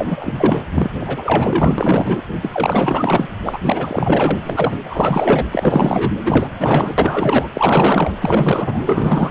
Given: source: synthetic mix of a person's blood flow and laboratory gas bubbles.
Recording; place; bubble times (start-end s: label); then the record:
Doppler ultrasound of blood flow; precordium
0.00-0.65 s: bubbles
0.72-0.91 s: bubbles
1.00-1.75 s: bubbles
1.78-2.22 s: bubbles
2.42-3.28 s: bubbles
3.44-3.59 s: bubbles
3.63-4.39 s: bubbles
4.45-4.78 s: bubbles
4.89-5.45 s: bubbles
5.51-6.12 s: bubbles
6.25-7.49 s: bubbles
7.54-8.12 s: bubbles
8.19-9.31 s: bubbles
From the record:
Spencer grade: 4 (maximum detectable bubble signal sounding continuously throughout systole and diastole of every cardiac period, and overriding the amplitude of the normal cardiac signals); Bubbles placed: anywhere in the cardiac cycle